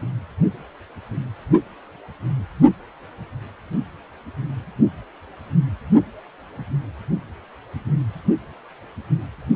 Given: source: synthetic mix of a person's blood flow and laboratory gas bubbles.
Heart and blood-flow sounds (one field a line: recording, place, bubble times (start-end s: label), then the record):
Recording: Doppler ultrasound of blood flow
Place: precordium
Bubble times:
no bubbles
From the record:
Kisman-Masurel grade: 000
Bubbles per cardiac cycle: 0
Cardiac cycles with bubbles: 0%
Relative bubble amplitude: no bubbles discernible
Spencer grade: 0 (complete lack of bubble signals)